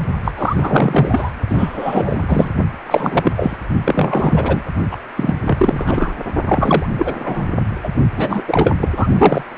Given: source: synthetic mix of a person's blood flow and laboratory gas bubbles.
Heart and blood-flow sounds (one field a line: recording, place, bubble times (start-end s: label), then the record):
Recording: Doppler ultrasound of blood flow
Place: precordium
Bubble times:
0.24-0.31 s: bubbles
0.37-1.32 s: bubbles
1.49-2.49 s: bubbles
2.86-3.31 s: bubbles
3.36-3.57 s: bubbles
3.85-4.62 s: bubbles
4.91-4.96 s: bubbles
5.16-5.35 s: bubbles
5.44-6.13 s: bubbles
6.46-6.86 s: bubbles
6.96-7.46 s: bubbles
7.83-7.89 s: bubbles
8.16-8.44 s: bubbles
8.47-8.75 s: bubbles
8.80-8.89 s: bubbles
8.96-9.07 s: bubbles
9.18-9.45 s: bubbles
From the record:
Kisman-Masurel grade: 343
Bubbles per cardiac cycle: rolling drumbeat, 9 or more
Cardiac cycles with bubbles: 100%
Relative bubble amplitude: loud (0.450 to 0.775)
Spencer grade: 3 (all of the cardiac periods contain showers or single bubble signals, but not dominating or overriding the cardiac motion signals)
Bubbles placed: only in the low amplitude regions of the cardiac cycle